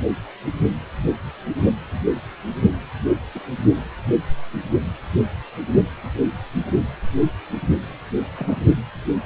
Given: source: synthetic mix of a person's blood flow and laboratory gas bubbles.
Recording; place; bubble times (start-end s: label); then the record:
Doppler ultrasound of blood flow; precordium
3.35-3.40 s: bubbles
8.37-8.66 s: bubbles
From the record:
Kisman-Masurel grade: 121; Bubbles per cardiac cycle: 1 to 2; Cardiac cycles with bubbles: 10 to 50%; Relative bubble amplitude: barely perceptible (0.100 to 0.250); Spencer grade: 2 (many but less than half of the cardiac periods contain bubble signals, singularly or in groups); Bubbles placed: anywhere in the cardiac cycle